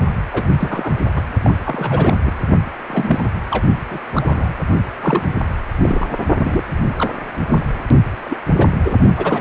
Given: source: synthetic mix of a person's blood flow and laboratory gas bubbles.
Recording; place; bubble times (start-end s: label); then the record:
Doppler ultrasound of blood flow; precordium
0.33-0.48 s: bubbles
0.59-0.92 s: bubbles
1.15-1.21 s: bubbles
1.44-1.54 s: bubbles
1.65-2.21 s: bubbles
2.26-2.36 s: bubbles
2.88-3.29 s: bubbles
3.50-3.65 s: bubbles
3.90-3.99 s: bubbles
4.14-4.54 s: bubbles
5.01-5.26 s: bubbles
5.82-6.18 s: bubbles
6.38-6.64 s: bubbles
6.98-7.12 s: bubbles
7.49-7.65 s: bubbles
8.25-8.39 s: bubbles
8.58-8.76 s: bubbles
8.85-8.96 s: bubbles
9.17-9.41 s: bubbles
From the record:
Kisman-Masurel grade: 242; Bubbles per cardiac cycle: several, 3 to 8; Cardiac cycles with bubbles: 100%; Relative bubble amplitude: moderate (0.250 to 0.450); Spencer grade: 3 (all of the cardiac periods contain showers or single bubble signals, but not dominating or overriding the cardiac motion signals); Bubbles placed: only in the low amplitude regions of the cardiac cycle